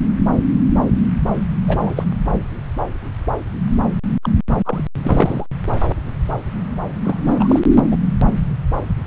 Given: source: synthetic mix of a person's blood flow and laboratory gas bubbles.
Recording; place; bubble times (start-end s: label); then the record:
Doppler ultrasound of blood flow; subclavian vein
1.66-2.04 s: bubbles
4.23-4.29 s: bubbles
4.65-4.82 s: bubbles
5.03-5.46 s: bubbles
7.04-7.21 s: bubbles
7.25-7.60 s: bubbles
7.90-7.98 s: bubbles
From the record:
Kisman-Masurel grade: 222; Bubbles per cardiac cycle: several, 3 to 8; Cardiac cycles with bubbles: 10 to 50%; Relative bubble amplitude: moderate (0.250 to 0.450); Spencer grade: 2 (many but less than half of the cardiac periods contain bubble signals, singularly or in groups); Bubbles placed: anywhere in the cardiac cycle